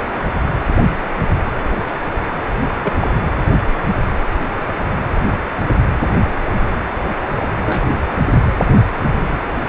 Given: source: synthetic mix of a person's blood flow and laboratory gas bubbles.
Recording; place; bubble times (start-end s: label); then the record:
Doppler ultrasound of blood flow; precordium
2.82-2.94 s: bubbles
2.99-3.08 s: bubbles
7.36-7.49 s: bubbles
7.66-8.00 s: bubbles
From the record:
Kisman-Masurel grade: 122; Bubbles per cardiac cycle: 1 to 2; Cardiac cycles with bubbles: 10 to 50%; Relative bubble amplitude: moderate (0.250 to 0.450); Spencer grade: 2 (many but less than half of the cardiac periods contain bubble signals, singularly or in groups); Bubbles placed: anywhere in the cardiac cycle